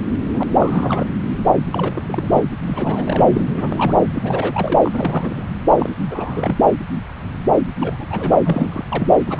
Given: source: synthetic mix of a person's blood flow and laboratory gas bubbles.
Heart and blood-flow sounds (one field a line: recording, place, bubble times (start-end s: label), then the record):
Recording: Doppler ultrasound of blood flow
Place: subclavian vein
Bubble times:
0.33-0.43 s: bubbles
0.60-1.07 s: bubbles
1.56-1.62 s: bubbles
1.72-2.42 s: bubbles
2.60-3.25 s: bubbles
3.32-3.50 s: bubbles
3.54-3.95 s: bubbles
4.14-4.79 s: bubbles
4.83-5.45 s: bubbles
5.78-5.95 s: bubbles
6.09-6.57 s: bubbles
7.80-8.07 s: bubbles
8.10-8.42 s: bubbles
8.45-8.84 s: bubbles
8.91-9.13 s: bubbles
9.27-9.40 s: bubbles
From the record:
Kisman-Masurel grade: 332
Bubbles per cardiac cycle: rolling drumbeat, 9 or more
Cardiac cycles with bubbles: 50 to 99%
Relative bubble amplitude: moderate (0.250 to 0.450)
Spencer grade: 3 (all of the cardiac periods contain showers or single bubble signals, but not dominating or overriding the cardiac motion signals)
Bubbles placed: anywhere in the cardiac cycle